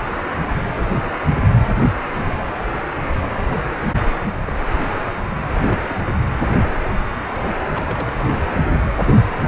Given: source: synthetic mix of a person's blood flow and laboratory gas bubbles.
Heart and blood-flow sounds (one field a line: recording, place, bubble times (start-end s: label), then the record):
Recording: Doppler ultrasound of blood flow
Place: precordium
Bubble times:
4.46-4.55 s: bubbles
5.61-5.77 s: bubbles
5.82-6.24 s: bubbles
7.74-8.26 s: bubbles
8.67-8.89 s: bubbles
9.06-9.16 s: bubbles
From the record:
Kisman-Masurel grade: 121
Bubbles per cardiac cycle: 1 to 2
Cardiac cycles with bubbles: 10 to 50%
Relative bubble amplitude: barely perceptible (0.100 to 0.250)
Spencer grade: 2 (many but less than half of the cardiac periods contain bubble signals, singularly or in groups)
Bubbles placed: anywhere in the cardiac cycle